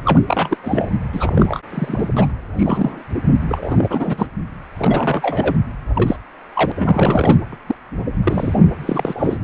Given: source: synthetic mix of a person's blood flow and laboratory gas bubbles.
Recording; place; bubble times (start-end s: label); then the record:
Doppler ultrasound of blood flow; precordium
0.05-0.23 s: bubbles
0.28-0.57 s: bubbles
0.64-0.90 s: bubbles
1.12-1.60 s: bubbles
1.70-2.10 s: bubbles
2.17-2.31 s: bubbles
2.57-3.03 s: bubbles
3.48-4.27 s: bubbles
4.79-5.58 s: bubbles
5.95-6.16 s: bubbles
6.54-6.72 s: bubbles
6.75-7.38 s: bubbles
7.52-7.56 s: bubbles
7.66-7.75 s: bubbles
8.24-8.58 s: bubbles
8.79-9.38 s: bubbles
From the record:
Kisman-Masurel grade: 242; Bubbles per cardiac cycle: several, 3 to 8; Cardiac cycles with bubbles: 100%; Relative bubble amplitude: moderate (0.250 to 0.450); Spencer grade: 3 (all of the cardiac periods contain showers or single bubble signals, but not dominating or overriding the cardiac motion signals); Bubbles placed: anywhere in the cardiac cycle